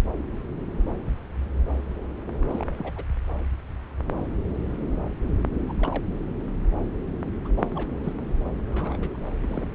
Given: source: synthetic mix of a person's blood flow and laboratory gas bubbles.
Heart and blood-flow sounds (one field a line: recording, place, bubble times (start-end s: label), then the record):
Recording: Doppler ultrasound of blood flow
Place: subclavian vein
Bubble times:
2.49-3.04 s: bubbles
5.68-5.74 s: bubbles
5.79-6.03 s: bubbles
7.44-7.48 s: bubbles
7.56-7.93 s: bubbles
8.03-8.13 s: bubbles
8.56-9.18 s: bubbles
9.41-9.67 s: bubbles
From the record:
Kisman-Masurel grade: 221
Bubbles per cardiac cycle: several, 3 to 8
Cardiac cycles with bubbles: 10 to 50%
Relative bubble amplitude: barely perceptible (0.100 to 0.250)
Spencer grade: 2 (many but less than half of the cardiac periods contain bubble signals, singularly or in groups)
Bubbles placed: anywhere in the cardiac cycle